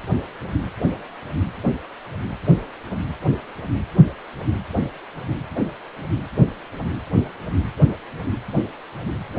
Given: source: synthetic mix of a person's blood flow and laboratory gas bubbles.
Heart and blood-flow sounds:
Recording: Doppler ultrasound of blood flow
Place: precordium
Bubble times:
no bubbles
From the record:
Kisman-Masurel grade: 000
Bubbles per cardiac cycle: 0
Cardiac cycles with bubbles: 0%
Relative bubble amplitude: no bubbles discernible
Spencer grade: 0 (complete lack of bubble signals)

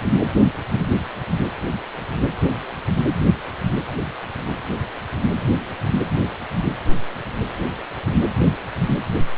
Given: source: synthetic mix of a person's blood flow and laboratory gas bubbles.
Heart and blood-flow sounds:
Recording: Doppler ultrasound of blood flow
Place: precordium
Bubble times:
no bubbles
From the record:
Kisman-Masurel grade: 000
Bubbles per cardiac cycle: 0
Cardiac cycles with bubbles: 0%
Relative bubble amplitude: no bubbles discernible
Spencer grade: 0 (complete lack of bubble signals)

